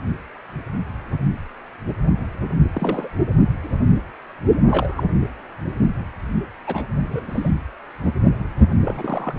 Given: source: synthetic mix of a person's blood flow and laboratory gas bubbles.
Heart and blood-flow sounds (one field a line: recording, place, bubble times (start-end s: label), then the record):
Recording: Doppler ultrasound of blood flow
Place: precordium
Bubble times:
2.73-3.08 s: bubbles
4.66-5.04 s: bubbles
6.66-6.82 s: bubbles
7.03-7.51 s: bubbles
8.84-9.33 s: bubbles
From the record:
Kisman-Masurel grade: 221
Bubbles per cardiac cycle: several, 3 to 8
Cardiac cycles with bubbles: 10 to 50%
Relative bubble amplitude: barely perceptible (0.100 to 0.250)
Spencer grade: 2 (many but less than half of the cardiac periods contain bubble signals, singularly or in groups)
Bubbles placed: anywhere in the cardiac cycle